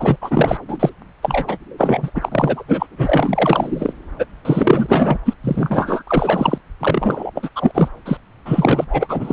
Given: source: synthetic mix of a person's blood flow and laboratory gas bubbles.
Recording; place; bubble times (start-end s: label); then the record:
Doppler ultrasound of blood flow; subclavian vein
0.00-0.16 s: bubbles
0.21-0.57 s: bubbles
0.68-0.90 s: bubbles
1.22-1.57 s: bubbles
1.78-2.10 s: bubbles
2.15-2.29 s: bubbles
2.31-2.64 s: bubbles
2.68-2.87 s: bubbles
2.91-3.93 s: bubbles
4.18-4.25 s: bubbles
4.45-5.18 s: bubbles
5.25-5.33 s: bubbles
5.42-6.02 s: bubbles
6.07-6.58 s: bubbles
6.79-7.31 s: bubbles
7.34-7.50 s: bubbles
7.55-7.71 s: bubbles
7.74-7.88 s: bubbles
8.05-8.17 s: bubbles
8.45-8.86 s: bubbles
8.89-9.33 s: bubbles
From the record:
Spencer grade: 4 (maximum detectable bubble signal sounding continuously throughout systole and diastole of every cardiac period, and overriding the amplitude of the normal cardiac signals); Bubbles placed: anywhere in the cardiac cycle